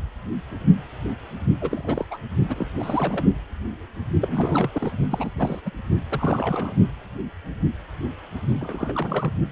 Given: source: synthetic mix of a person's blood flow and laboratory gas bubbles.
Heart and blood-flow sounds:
Doppler ultrasound of blood flow; precordium
1.61-2.06 s: bubbles
2.10-2.18 s: bubbles
2.48-2.68 s: bubbles
2.76-3.25 s: bubbles
4.21-4.70 s: bubbles
4.75-4.92 s: bubbles
5.09-5.31 s: bubbles
5.36-5.61 s: bubbles
5.66-5.71 s: bubbles
6.09-6.74 s: bubbles
8.60-9.32 s: bubbles
From the record:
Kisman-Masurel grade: 332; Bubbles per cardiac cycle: rolling drumbeat, 9 or more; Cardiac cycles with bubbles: 50 to 99%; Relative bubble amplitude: moderate (0.250 to 0.450); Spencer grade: 3 (all of the cardiac periods contain showers or single bubble signals, but not dominating or overriding the cardiac motion signals); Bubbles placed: only in the low amplitude regions of the cardiac cycle

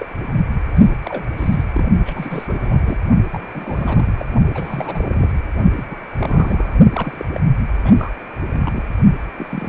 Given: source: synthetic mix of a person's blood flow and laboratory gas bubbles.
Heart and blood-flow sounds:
Doppler ultrasound of blood flow; precordium
0.00-0.07 s: bubbles
0.76-0.95 s: bubbles
1.05-1.25 s: bubbles
1.37-1.65 s: bubbles
1.74-1.85 s: bubbles
2.05-2.98 s: bubbles
3.32-3.46 s: bubbles
3.54-4.13 s: bubbles
4.18-4.25 s: bubbles
4.54-5.30 s: bubbles
5.75-5.84 s: bubbles
5.91-5.96 s: bubbles
6.17-6.75 s: bubbles
6.92-7.25 s: bubbles
7.33-7.41 s: bubbles
7.84-7.92 s: bubbles
7.96-8.12 s: bubbles
8.53-8.82 s: bubbles
9.38-9.46 s: bubbles
9.51-9.69 s: bubbles
From the record:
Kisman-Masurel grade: 342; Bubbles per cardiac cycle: rolling drumbeat, 9 or more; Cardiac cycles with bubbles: 100%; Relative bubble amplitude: moderate (0.250 to 0.450); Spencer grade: 3 (all of the cardiac periods contain showers or single bubble signals, but not dominating or overriding the cardiac motion signals); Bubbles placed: only in the low amplitude regions of the cardiac cycle

